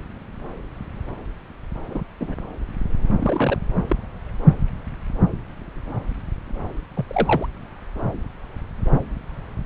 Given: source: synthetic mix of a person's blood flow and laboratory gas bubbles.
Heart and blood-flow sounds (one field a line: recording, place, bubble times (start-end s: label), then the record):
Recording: Doppler ultrasound of blood flow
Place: subclavian vein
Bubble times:
1.90-2.03 s: bubbles
2.20-2.35 s: bubbles
3.19-3.58 s: bubbles
3.88-3.96 s: bubbles
6.96-7.04 s: bubbles
7.08-7.46 s: bubbles
From the record:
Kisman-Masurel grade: 122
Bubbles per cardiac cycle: 1 to 2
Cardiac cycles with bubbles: 10 to 50%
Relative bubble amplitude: moderate (0.250 to 0.450)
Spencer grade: 2 (many but less than half of the cardiac periods contain bubble signals, singularly or in groups)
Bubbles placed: anywhere in the cardiac cycle